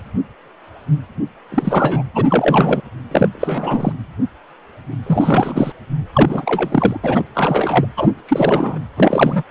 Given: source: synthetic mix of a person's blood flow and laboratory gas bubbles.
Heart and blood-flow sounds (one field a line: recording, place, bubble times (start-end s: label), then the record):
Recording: Doppler ultrasound of blood flow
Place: precordium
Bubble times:
1.49-2.03 s: bubbles
2.15-2.26 s: bubbles
2.29-2.81 s: bubbles
3.11-3.29 s: bubbles
3.33-3.93 s: bubbles
5.06-5.72 s: bubbles
6.13-7.24 s: bubbles
7.34-7.87 s: bubbles
7.97-8.08 s: bubbles
8.28-8.79 s: bubbles
8.97-9.43 s: bubbles
From the record:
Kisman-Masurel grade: 333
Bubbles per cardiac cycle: rolling drumbeat, 9 or more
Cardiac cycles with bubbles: 50 to 99%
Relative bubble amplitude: loud (0.450 to 0.775)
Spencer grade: 3 (all of the cardiac periods contain showers or single bubble signals, but not dominating or overriding the cardiac motion signals)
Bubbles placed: anywhere in the cardiac cycle